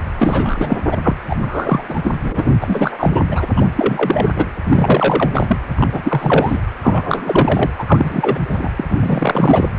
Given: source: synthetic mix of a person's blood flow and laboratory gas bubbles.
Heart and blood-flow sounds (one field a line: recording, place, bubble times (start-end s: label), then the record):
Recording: Doppler ultrasound of blood flow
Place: precordium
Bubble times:
0.16-0.77 s: bubbles
0.91-0.97 s: bubbles
1.03-1.16 s: bubbles
1.28-1.35 s: bubbles
1.41-1.82 s: bubbles
1.89-2.11 s: bubbles
2.22-2.51 s: bubbles
2.61-3.25 s: bubbles
3.31-3.46 s: bubbles
3.56-3.67 s: bubbles
3.76-4.46 s: bubbles
4.68-5.30 s: bubbles
5.33-5.57 s: bubbles
5.75-5.88 s: bubbles
5.92-6.58 s: bubbles
6.83-7.71 s: bubbles
7.78-7.84 s: bubbles
7.88-8.39 s: bubbles
8.49-8.71 s: bubbles
8.76-8.84 s: bubbles
8.89-9.69 s: bubbles
From the record:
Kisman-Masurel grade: 333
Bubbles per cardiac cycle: rolling drumbeat, 9 or more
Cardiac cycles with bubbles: 50 to 99%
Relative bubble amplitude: loud (0.450 to 0.775)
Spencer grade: 3 (all of the cardiac periods contain showers or single bubble signals, but not dominating or overriding the cardiac motion signals)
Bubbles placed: anywhere in the cardiac cycle